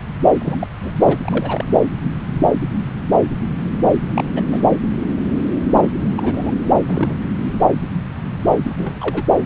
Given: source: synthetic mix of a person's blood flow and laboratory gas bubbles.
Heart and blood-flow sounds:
Doppler ultrasound of blood flow; subclavian vein
0.40-0.56 s: bubbles
0.59-0.67 s: bubbles
0.83-0.91 s: bubbles
0.99-1.17 s: bubbles
1.22-1.65 s: bubbles
1.72-1.83 s: bubbles
4.15-4.24 s: bubbles
4.35-4.42 s: bubbles
4.50-4.62 s: bubbles
5.69-5.90 s: bubbles
6.17-6.51 s: bubbles
6.88-7.18 s: bubbles
8.62-8.73 s: bubbles
8.77-9.24 s: bubbles
From the record:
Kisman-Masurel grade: 222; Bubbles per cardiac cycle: several, 3 to 8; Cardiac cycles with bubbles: 10 to 50%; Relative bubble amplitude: moderate (0.250 to 0.450); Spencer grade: 2 (many but less than half of the cardiac periods contain bubble signals, singularly or in groups); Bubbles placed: anywhere in the cardiac cycle

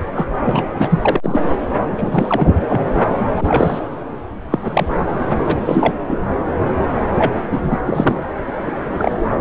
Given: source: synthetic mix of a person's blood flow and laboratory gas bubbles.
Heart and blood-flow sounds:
Doppler ultrasound of blood flow; subclavian vein
0.15-0.29 s: bubbles
0.44-0.72 s: bubbles
0.78-1.40 s: bubbles
1.97-2.54 s: bubbles
2.69-2.87 s: bubbles
3.19-3.27 s: bubbles
3.35-3.85 s: bubbles
4.50-4.87 s: bubbles
5.46-5.58 s: bubbles
5.66-5.94 s: bubbles
6.09-6.17 s: bubbles
7.18-7.33 s: bubbles
7.38-7.78 s: bubbles
7.85-8.23 s: bubbles
8.63-8.71 s: bubbles
8.97-9.14 s: bubbles
From the record:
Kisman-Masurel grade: 243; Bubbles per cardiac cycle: several, 3 to 8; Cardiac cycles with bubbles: 100%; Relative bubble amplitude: loud (0.450 to 0.775); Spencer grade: 3 (all of the cardiac periods contain showers or single bubble signals, but not dominating or overriding the cardiac motion signals); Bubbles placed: anywhere in the cardiac cycle

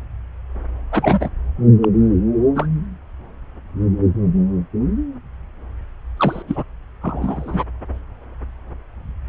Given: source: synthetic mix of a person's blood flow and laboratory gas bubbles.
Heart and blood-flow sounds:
Doppler ultrasound of blood flow; subclavian vein
0.92-1.29 s: bubbles
1.82-1.89 s: bubbles
2.55-2.67 s: bubbles
6.17-6.42 s: bubbles
6.47-6.63 s: bubbles
7.01-7.64 s: bubbles
From the record:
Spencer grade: 2 (many but less than half of the cardiac periods contain bubble signals, singularly or in groups); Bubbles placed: anywhere in the cardiac cycle

